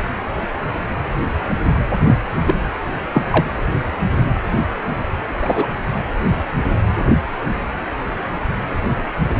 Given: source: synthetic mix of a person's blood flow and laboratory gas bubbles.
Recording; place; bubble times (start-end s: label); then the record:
Doppler ultrasound of blood flow; precordium
2.00-2.17 s: bubbles
2.46-2.55 s: bubbles
3.13-3.22 s: bubbles
3.30-3.45 s: bubbles
5.42-5.68 s: bubbles
From the record:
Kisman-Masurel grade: 123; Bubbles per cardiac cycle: 1 to 2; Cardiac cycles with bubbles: 10 to 50%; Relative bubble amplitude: loud (0.450 to 0.775); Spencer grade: 2 (many but less than half of the cardiac periods contain bubble signals, singularly or in groups); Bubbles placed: anywhere in the cardiac cycle